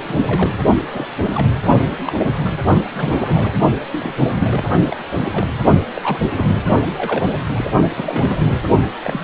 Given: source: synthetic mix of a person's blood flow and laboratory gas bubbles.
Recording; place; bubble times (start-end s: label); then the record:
Doppler ultrasound of blood flow; precordium
0.03-0.54 s: bubbles
0.93-1.06 s: bubbles
1.22-1.49 s: bubbles
2.05-2.33 s: bubbles
2.44-2.49 s: bubbles
2.92-3.51 s: bubbles
3.92-4.14 s: bubbles
4.19-4.64 s: bubbles
4.87-4.96 s: bubbles
5.13-5.47 s: bubbles
5.94-6.20 s: bubbles
6.37-6.63 s: bubbles
6.92-7.27 s: bubbles
7.38-7.44 s: bubbles
7.54-7.65 s: bubbles
7.96-8.60 s: bubbles
9.04-9.21 s: bubbles
From the record:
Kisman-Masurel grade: 242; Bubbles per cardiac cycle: several, 3 to 8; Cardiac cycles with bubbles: 100%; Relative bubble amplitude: moderate (0.250 to 0.450); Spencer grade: 3 (all of the cardiac periods contain showers or single bubble signals, but not dominating or overriding the cardiac motion signals); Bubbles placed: only in the low amplitude regions of the cardiac cycle